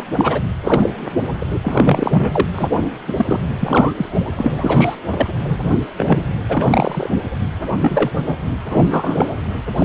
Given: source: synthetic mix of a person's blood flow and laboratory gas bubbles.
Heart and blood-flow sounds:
Doppler ultrasound of blood flow; precordium
0.00-0.04 s: bubbles
0.12-0.41 s: bubbles
0.64-0.91 s: bubbles
1.41-1.46 s: bubbles
1.64-2.48 s: bubbles
2.53-2.68 s: bubbles
3.07-3.13 s: bubbles
3.16-3.40 s: bubbles
3.59-4.21 s: bubbles
4.38-4.53 s: bubbles
4.58-4.96 s: bubbles
5.12-5.26 s: bubbles
5.48-5.79 s: bubbles
5.97-6.29 s: bubbles
6.49-7.09 s: bubbles
7.80-8.11 s: bubbles
8.23-8.36 s: bubbles
8.69-8.83 s: bubbles
8.90-9.30 s: bubbles
9.75-9.84 s: bubbles
From the record:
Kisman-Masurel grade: 243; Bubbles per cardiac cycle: several, 3 to 8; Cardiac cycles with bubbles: 100%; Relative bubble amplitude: loud (0.450 to 0.775); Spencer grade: 3 (all of the cardiac periods contain showers or single bubble signals, but not dominating or overriding the cardiac motion signals); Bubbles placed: anywhere in the cardiac cycle

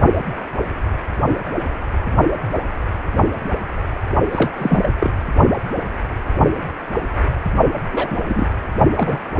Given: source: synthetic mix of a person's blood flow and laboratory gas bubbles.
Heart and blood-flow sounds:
Doppler ultrasound of blood flow; precordium
4.31-4.52 s: bubbles
4.57-4.90 s: bubbles
5.00-5.10 s: bubbles
7.92-8.21 s: bubbles
8.28-8.49 s: bubbles
8.96-9.20 s: bubbles
From the record:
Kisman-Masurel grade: 222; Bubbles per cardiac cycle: several, 3 to 8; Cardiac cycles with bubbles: 10 to 50%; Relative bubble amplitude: moderate (0.250 to 0.450); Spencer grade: 2 (many but less than half of the cardiac periods contain bubble signals, singularly or in groups); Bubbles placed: only in the low amplitude regions of the cardiac cycle

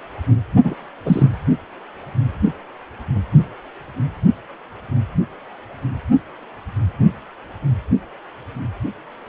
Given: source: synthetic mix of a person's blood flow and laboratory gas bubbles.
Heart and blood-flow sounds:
Doppler ultrasound of blood flow; precordium
0.64-0.75 s: bubbles
1.05-1.28 s: bubbles
From the record:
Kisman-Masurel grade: 213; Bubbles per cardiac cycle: several, 3 to 8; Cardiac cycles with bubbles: 1 to 10%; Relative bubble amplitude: loud (0.450 to 0.775); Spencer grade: 1 (occasional bubble signal discernible with the cardiac motion signal, with majority of cardiac periods free of bubbles); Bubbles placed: only in the low amplitude regions of the cardiac cycle

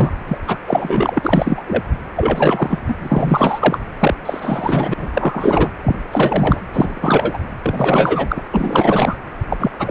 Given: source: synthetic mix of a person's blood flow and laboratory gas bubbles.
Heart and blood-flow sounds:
Doppler ultrasound of blood flow; precordium
0.00-0.12 s: bubbles
0.28-0.38 s: bubbles
0.47-0.57 s: bubbles
0.66-1.20 s: bubbles
1.23-1.62 s: bubbles
1.67-1.82 s: bubbles
2.16-2.81 s: bubbles
2.88-2.96 s: bubbles
3.02-3.78 s: bubbles
4.00-4.14 s: bubbles
4.25-4.94 s: bubbles
4.97-5.06 s: bubbles
5.13-5.71 s: bubbles
5.83-5.98 s: bubbles
6.12-6.60 s: bubbles
6.73-7.38 s: bubbles
7.62-8.42 s: bubbles
8.51-9.16 s: bubbles
9.50-9.71 s: bubbles
9.79-9.91 s: bubbles
From the record:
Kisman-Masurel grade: 343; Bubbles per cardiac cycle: rolling drumbeat, 9 or more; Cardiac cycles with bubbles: 100%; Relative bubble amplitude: loud (0.450 to 0.775); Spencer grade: 3 (all of the cardiac periods contain showers or single bubble signals, but not dominating or overriding the cardiac motion signals); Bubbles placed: anywhere in the cardiac cycle

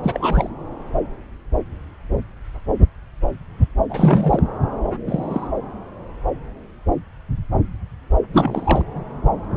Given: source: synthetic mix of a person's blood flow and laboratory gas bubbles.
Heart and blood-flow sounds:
Doppler ultrasound of blood flow; subclavian vein
0.03-0.50 s: bubbles
3.89-4.43 s: bubbles
5.07-5.48 s: bubbles
8.33-8.81 s: bubbles
From the record:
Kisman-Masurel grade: 222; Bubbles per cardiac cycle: several, 3 to 8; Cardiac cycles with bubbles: 10 to 50%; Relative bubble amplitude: moderate (0.250 to 0.450); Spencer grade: 2 (many but less than half of the cardiac periods contain bubble signals, singularly or in groups); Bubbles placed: anywhere in the cardiac cycle

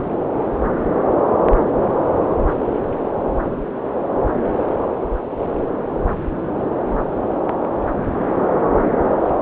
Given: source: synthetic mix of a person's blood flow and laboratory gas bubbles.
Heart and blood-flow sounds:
Doppler ultrasound of blood flow; subclavian vein
no bubbles
From the record:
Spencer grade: 0 (complete lack of bubble signals)

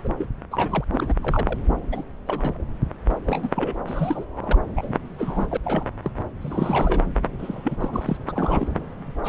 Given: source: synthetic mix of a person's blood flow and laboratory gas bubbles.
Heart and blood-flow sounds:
Doppler ultrasound of blood flow; subclavian vein
0.03-0.08 s: bubbles
0.18-0.27 s: bubbles
0.51-0.84 s: bubbles
0.92-1.14 s: bubbles
1.23-1.59 s: bubbles
1.92-2.03 s: bubbles
2.26-2.63 s: bubbles
3.25-3.50 s: bubbles
3.56-3.73 s: bubbles
3.87-4.25 s: bubbles
4.37-4.57 s: bubbles
4.75-4.96 s: bubbles
5.18-5.46 s: bubbles
5.50-5.57 s: bubbles
5.63-5.87 s: bubbles
6.03-6.12 s: bubbles
6.41-7.02 s: bubbles
7.39-8.17 s: bubbles
8.20-8.24 s: bubbles
8.28-8.68 s: bubbles
9.24-9.28 s: bubbles
From the record:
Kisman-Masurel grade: 242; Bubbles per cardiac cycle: several, 3 to 8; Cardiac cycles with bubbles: 100%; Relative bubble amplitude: moderate (0.250 to 0.450); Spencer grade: 3 (all of the cardiac periods contain showers or single bubble signals, but not dominating or overriding the cardiac motion signals); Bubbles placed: anywhere in the cardiac cycle

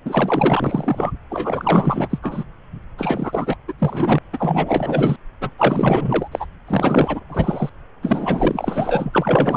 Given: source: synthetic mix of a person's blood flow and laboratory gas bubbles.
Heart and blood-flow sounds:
Doppler ultrasound of blood flow; subclavian vein
0.05-1.11 s: bubbles
1.30-2.19 s: bubbles
2.22-2.44 s: bubbles
2.97-3.56 s: bubbles
3.67-3.73 s: bubbles
3.79-4.18 s: bubbles
4.33-5.16 s: bubbles
5.41-5.50 s: bubbles
5.58-6.28 s: bubbles
6.31-6.46 s: bubbles
6.67-7.21 s: bubbles
7.29-7.70 s: bubbles
8.02-9.57 s: bubbles
From the record:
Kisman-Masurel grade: 444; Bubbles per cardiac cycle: continuous sound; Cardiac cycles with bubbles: 100%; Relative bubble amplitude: maximal (0.775 to 0.999); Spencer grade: 4 (maximum detectable bubble signal sounding continuously throughout systole and diastole of every cardiac period, and overriding the amplitude of the normal cardiac signals); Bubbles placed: anywhere in the cardiac cycle

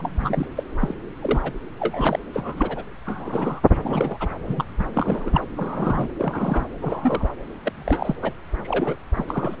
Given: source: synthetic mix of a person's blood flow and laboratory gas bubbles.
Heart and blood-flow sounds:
Doppler ultrasound of blood flow; subclavian vein
0.00-0.46 s: bubbles
0.56-0.63 s: bubbles
0.79-0.95 s: bubbles
1.21-1.52 s: bubbles
1.79-2.19 s: bubbles
2.33-2.83 s: bubbles
3.06-3.60 s: bubbles
3.83-4.29 s: bubbles
4.47-4.66 s: bubbles
4.79-4.84 s: bubbles
4.95-5.43 s: bubbles
5.57-6.08 s: bubbles
6.18-6.65 s: bubbles
6.81-7.29 s: bubbles
7.65-8.15 s: bubbles
8.21-8.33 s: bubbles
8.63-8.96 s: bubbles
9.15-9.24 s: bubbles
9.28-9.56 s: bubbles
From the record:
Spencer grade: 3 (all of the cardiac periods contain showers or single bubble signals, but not dominating or overriding the cardiac motion signals); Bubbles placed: anywhere in the cardiac cycle

